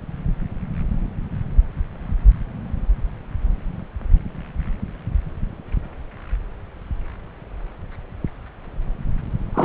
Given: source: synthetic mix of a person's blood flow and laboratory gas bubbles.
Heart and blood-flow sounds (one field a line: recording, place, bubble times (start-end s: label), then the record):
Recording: Doppler ultrasound of blood flow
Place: subclavian vein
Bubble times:
9.54-9.65 s: bubbles
From the record:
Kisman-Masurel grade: 212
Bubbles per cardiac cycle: several, 3 to 8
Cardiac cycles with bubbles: 1 to 10%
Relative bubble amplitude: moderate (0.250 to 0.450)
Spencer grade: 1 (occasional bubble signal discernible with the cardiac motion signal, with majority of cardiac periods free of bubbles)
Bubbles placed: anywhere in the cardiac cycle